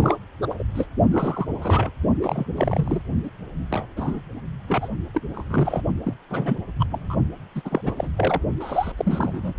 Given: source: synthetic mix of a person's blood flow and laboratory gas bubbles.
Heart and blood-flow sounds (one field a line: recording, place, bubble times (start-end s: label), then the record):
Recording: Doppler ultrasound of blood flow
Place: precordium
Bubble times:
0.01-0.16 s: bubbles
0.42-0.46 s: bubbles
0.49-0.54 s: bubbles
0.58-0.63 s: bubbles
0.74-0.87 s: bubbles
1.11-1.48 s: bubbles
1.61-1.90 s: bubbles
2.21-2.46 s: bubbles
2.56-3.02 s: bubbles
3.23-3.30 s: bubbles
3.71-3.86 s: bubbles
3.96-4.21 s: bubbles
4.67-4.88 s: bubbles
5.14-5.21 s: bubbles
5.33-5.83 s: bubbles
6.05-6.14 s: bubbles
6.30-6.57 s: bubbles
6.79-6.84 s: bubbles
6.90-7.17 s: bubbles
7.55-7.62 s: bubbles
7.64-7.81 s: bubbles
7.84-7.94 s: bubbles
7.96-8.09 s: bubbles
8.17-8.40 s: bubbles
8.60-8.92 s: bubbles
8.97-9.53 s: bubbles
From the record:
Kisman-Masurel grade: 242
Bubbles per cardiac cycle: several, 3 to 8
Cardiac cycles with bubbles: 100%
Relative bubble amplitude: moderate (0.250 to 0.450)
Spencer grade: 3 (all of the cardiac periods contain showers or single bubble signals, but not dominating or overriding the cardiac motion signals)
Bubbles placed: only in the low amplitude regions of the cardiac cycle